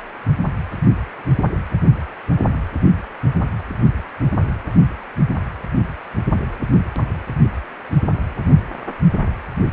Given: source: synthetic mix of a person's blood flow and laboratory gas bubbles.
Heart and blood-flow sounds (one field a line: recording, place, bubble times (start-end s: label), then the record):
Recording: Doppler ultrasound of blood flow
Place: precordium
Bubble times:
no bubbles
From the record:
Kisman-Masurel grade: 000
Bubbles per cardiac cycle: 0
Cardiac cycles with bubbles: 0%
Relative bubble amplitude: no bubbles discernible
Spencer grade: 0 (complete lack of bubble signals)